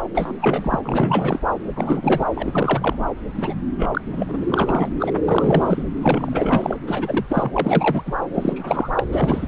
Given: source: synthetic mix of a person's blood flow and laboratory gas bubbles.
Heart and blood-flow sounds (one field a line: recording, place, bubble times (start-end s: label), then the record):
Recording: Doppler ultrasound of blood flow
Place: subclavian vein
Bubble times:
0.14-0.32 s: bubbles
0.41-0.79 s: bubbles
0.84-1.40 s: bubbles
1.76-2.25 s: bubbles
2.34-2.96 s: bubbles
3.37-3.54 s: bubbles
3.76-3.87 s: bubbles
3.93-4.01 s: bubbles
4.12-4.88 s: bubbles
5.00-5.11 s: bubbles
5.25-5.83 s: bubbles
6.01-6.76 s: bubbles
6.87-7.26 s: bubbles
7.29-7.50 s: bubbles
7.53-8.02 s: bubbles
8.06-8.12 s: bubbles
8.34-8.88 s: bubbles
8.96-9.04 s: bubbles
9.12-9.47 s: bubbles
From the record:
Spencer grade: 3 (all of the cardiac periods contain showers or single bubble signals, but not dominating or overriding the cardiac motion signals)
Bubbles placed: anywhere in the cardiac cycle